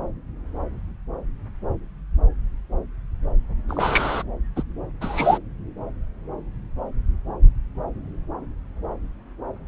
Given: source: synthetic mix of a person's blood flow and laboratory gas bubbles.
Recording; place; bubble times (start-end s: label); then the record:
Doppler ultrasound of blood flow; subclavian vein
3.69-4.23 s: bubbles
4.56-4.63 s: bubbles
5.00-5.38 s: bubbles
From the record:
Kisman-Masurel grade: 213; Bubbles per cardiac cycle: several, 3 to 8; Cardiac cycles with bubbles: 1 to 10%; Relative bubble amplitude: loud (0.450 to 0.775); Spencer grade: 1 (occasional bubble signal discernible with the cardiac motion signal, with majority of cardiac periods free of bubbles); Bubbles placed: anywhere in the cardiac cycle